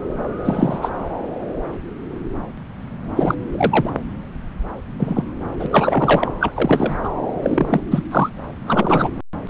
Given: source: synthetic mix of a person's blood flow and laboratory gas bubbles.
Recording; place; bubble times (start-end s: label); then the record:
Doppler ultrasound of blood flow; subclavian vein
0.45-0.79 s: bubbles
0.81-0.89 s: bubbles
3.17-3.35 s: bubbles
3.52-3.90 s: bubbles
4.99-5.23 s: bubbles
5.59-5.67 s: bubbles
5.71-6.31 s: bubbles
6.40-6.51 s: bubbles
6.55-6.97 s: bubbles
7.03-7.09 s: bubbles
7.42-7.81 s: bubbles
7.90-8.02 s: bubbles
8.11-8.29 s: bubbles
8.66-9.09 s: bubbles
9.46-9.50 s: bubbles
From the record:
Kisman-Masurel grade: 233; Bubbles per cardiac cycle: several, 3 to 8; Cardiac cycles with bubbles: 50 to 99%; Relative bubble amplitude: loud (0.450 to 0.775); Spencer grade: 3 (all of the cardiac periods contain showers or single bubble signals, but not dominating or overriding the cardiac motion signals); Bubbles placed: anywhere in the cardiac cycle